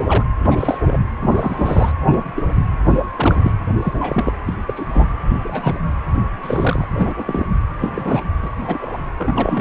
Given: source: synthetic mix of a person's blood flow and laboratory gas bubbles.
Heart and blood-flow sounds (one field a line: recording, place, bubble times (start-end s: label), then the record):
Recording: Doppler ultrasound of blood flow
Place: precordium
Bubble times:
0.07-0.24 s: bubbles
0.44-0.97 s: bubbles
1.20-1.92 s: bubbles
2.00-2.24 s: bubbles
2.35-2.44 s: bubbles
2.89-2.98 s: bubbles
3.16-3.52 s: bubbles
3.82-3.93 s: bubbles
4.00-4.33 s: bubbles
4.45-4.54 s: bubbles
4.66-4.84 s: bubbles
4.87-5.06 s: bubbles
5.42-5.79 s: bubbles
6.42-6.88 s: bubbles
6.96-7.13 s: bubbles
7.17-7.46 s: bubbles
7.79-8.23 s: bubbles
8.42-8.49 s: bubbles
8.58-8.78 s: bubbles
8.80-8.97 s: bubbles
9.18-9.61 s: bubbles
From the record:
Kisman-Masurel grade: 242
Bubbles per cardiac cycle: several, 3 to 8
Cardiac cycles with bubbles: 100%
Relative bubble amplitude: moderate (0.250 to 0.450)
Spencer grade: 3 (all of the cardiac periods contain showers or single bubble signals, but not dominating or overriding the cardiac motion signals)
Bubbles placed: anywhere in the cardiac cycle